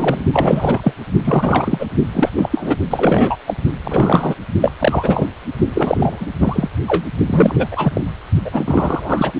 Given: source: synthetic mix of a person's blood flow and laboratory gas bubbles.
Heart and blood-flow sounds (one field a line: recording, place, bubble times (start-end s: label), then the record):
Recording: Doppler ultrasound of blood flow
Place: precordium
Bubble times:
0.00-0.24 s: bubbles
0.33-0.93 s: bubbles
1.25-1.87 s: bubbles
2.13-2.29 s: bubbles
2.37-2.76 s: bubbles
2.90-3.36 s: bubbles
3.46-3.54 s: bubbles
3.83-4.35 s: bubbles
4.60-4.71 s: bubbles
4.79-5.26 s: bubbles
5.74-6.25 s: bubbles
6.39-6.68 s: bubbles
6.87-7.04 s: bubbles
7.27-7.67 s: bubbles
7.71-8.01 s: bubbles
8.45-9.32 s: bubbles
From the record:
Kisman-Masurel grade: 333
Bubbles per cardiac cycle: rolling drumbeat, 9 or more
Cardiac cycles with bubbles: 50 to 99%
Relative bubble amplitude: loud (0.450 to 0.775)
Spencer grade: 3 (all of the cardiac periods contain showers or single bubble signals, but not dominating or overriding the cardiac motion signals)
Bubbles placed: only in the low amplitude regions of the cardiac cycle